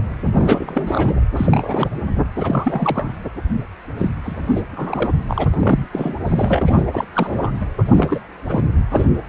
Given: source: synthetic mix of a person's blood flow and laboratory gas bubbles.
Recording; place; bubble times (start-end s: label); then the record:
Doppler ultrasound of blood flow; precordium
0.25-1.20 s: bubbles
1.36-1.90 s: bubbles
2.04-2.23 s: bubbles
2.35-3.17 s: bubbles
3.97-4.09 s: bubbles
4.23-4.62 s: bubbles
4.76-5.12 s: bubbles
5.27-5.44 s: bubbles
5.50-5.87 s: bubbles
5.92-6.14 s: bubbles
6.27-6.84 s: bubbles
6.87-7.04 s: bubbles
7.14-7.66 s: bubbles
7.78-7.83 s: bubbles
7.85-8.20 s: bubbles
8.49-8.65 s: bubbles
8.90-9.06 s: bubbles
From the record:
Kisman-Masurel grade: 332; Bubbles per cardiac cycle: rolling drumbeat, 9 or more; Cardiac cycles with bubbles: 50 to 99%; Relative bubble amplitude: moderate (0.250 to 0.450); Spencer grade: 3 (all of the cardiac periods contain showers or single bubble signals, but not dominating or overriding the cardiac motion signals); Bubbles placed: anywhere in the cardiac cycle